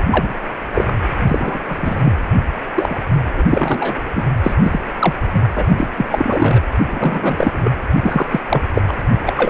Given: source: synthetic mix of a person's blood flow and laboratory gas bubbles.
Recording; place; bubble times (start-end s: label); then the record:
Doppler ultrasound of blood flow; precordium
0.11-0.32 s: bubbles
0.73-0.94 s: bubbles
1.28-1.58 s: bubbles
1.68-2.14 s: bubbles
2.75-2.99 s: bubbles
3.28-3.97 s: bubbles
4.15-4.24 s: bubbles
4.43-4.54 s: bubbles
4.61-4.79 s: bubbles
4.99-5.14 s: bubbles
5.33-5.42 s: bubbles
5.55-5.66 s: bubbles
5.70-5.88 s: bubbles
5.97-6.07 s: bubbles
6.11-6.60 s: bubbles
6.88-7.75 s: bubbles
8.01-8.26 s: bubbles
8.31-8.40 s: bubbles
8.48-8.62 s: bubbles
8.73-8.81 s: bubbles
8.88-8.93 s: bubbles
9.26-9.33 s: bubbles
9.35-9.50 s: bubbles
From the record:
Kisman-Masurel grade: 243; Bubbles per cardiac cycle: several, 3 to 8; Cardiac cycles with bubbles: 100%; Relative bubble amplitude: loud (0.450 to 0.775); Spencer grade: 3 (all of the cardiac periods contain showers or single bubble signals, but not dominating or overriding the cardiac motion signals); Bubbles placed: anywhere in the cardiac cycle